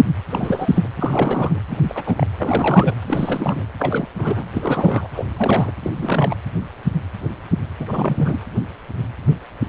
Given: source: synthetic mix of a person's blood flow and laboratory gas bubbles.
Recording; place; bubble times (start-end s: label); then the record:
Doppler ultrasound of blood flow; precordium
0.29-0.89 s: bubbles
0.95-1.60 s: bubbles
1.70-1.77 s: bubbles
1.82-2.26 s: bubbles
2.38-2.96 s: bubbles
3.04-3.65 s: bubbles
3.79-4.06 s: bubbles
4.18-4.46 s: bubbles
4.53-5.08 s: bubbles
5.12-5.26 s: bubbles
5.37-5.71 s: bubbles
5.83-5.91 s: bubbles
5.96-6.35 s: bubbles
7.79-8.40 s: bubbles
From the record:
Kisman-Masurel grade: 332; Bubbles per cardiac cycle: rolling drumbeat, 9 or more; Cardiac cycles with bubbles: 50 to 99%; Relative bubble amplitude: moderate (0.250 to 0.450); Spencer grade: 3 (all of the cardiac periods contain showers or single bubble signals, but not dominating or overriding the cardiac motion signals); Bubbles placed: anywhere in the cardiac cycle